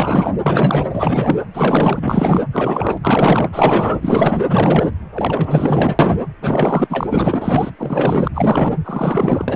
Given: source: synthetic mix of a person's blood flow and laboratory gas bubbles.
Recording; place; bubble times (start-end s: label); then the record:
Doppler ultrasound of blood flow; precordium
0.00-0.35 s: bubbles
0.46-0.85 s: bubbles
0.93-1.35 s: bubbles
1.53-2.00 s: bubbles
2.02-2.42 s: bubbles
2.52-2.98 s: bubbles
3.02-3.49 s: bubbles
3.52-4.45 s: bubbles
4.47-4.89 s: bubbles
5.14-6.19 s: bubbles
6.41-7.71 s: bubbles
7.78-8.28 s: bubbles
8.33-8.75 s: bubbles
8.84-9.45 s: bubbles
9.47-9.56 s: bubbles
From the record:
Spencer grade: 4 (maximum detectable bubble signal sounding continuously throughout systole and diastole of every cardiac period, and overriding the amplitude of the normal cardiac signals); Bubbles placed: anywhere in the cardiac cycle